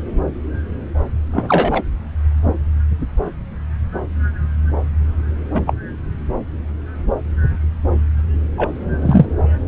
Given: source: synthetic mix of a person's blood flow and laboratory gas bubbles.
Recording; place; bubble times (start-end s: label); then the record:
Doppler ultrasound of blood flow; subclavian vein
1.32-1.83 s: bubbles
5.54-5.61 s: bubbles
5.67-5.74 s: bubbles
8.57-8.70 s: bubbles
9.02-9.26 s: bubbles
From the record:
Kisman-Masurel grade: 123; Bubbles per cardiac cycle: 1 to 2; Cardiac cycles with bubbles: 10 to 50%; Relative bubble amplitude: loud (0.450 to 0.775); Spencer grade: 2 (many but less than half of the cardiac periods contain bubble signals, singularly or in groups); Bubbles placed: anywhere in the cardiac cycle